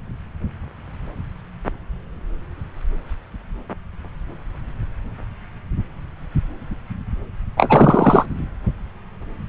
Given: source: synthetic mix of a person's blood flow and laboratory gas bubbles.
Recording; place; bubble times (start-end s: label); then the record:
Doppler ultrasound of blood flow; subclavian vein
7.57-8.26 s: bubbles
From the record:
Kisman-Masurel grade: 223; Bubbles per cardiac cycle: several, 3 to 8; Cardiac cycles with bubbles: 10 to 50%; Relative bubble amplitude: loud (0.450 to 0.775); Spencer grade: 2 (many but less than half of the cardiac periods contain bubble signals, singularly or in groups); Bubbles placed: anywhere in the cardiac cycle